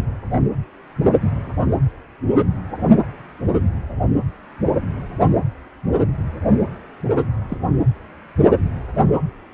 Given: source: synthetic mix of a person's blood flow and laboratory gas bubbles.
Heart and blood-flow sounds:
Doppler ultrasound of blood flow; precordium
7.48-7.57 s: bubbles
From the record:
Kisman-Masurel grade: 111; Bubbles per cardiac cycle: 1 to 2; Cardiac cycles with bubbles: 1 to 10%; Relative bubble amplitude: barely perceptible (0.100 to 0.250); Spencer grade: 1 (occasional bubble signal discernible with the cardiac motion signal, with majority of cardiac periods free of bubbles); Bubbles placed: anywhere in the cardiac cycle

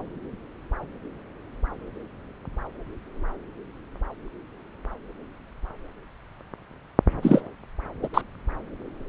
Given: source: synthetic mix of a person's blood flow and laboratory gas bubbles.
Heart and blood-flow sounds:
Doppler ultrasound of blood flow; subclavian vein
7.22-7.41 s: bubbles
8.03-8.09 s: bubbles
8.13-8.21 s: bubbles
From the record:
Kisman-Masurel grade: 213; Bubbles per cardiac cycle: several, 3 to 8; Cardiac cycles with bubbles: 1 to 10%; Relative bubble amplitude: loud (0.450 to 0.775); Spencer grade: 1 (occasional bubble signal discernible with the cardiac motion signal, with majority of cardiac periods free of bubbles); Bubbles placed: anywhere in the cardiac cycle

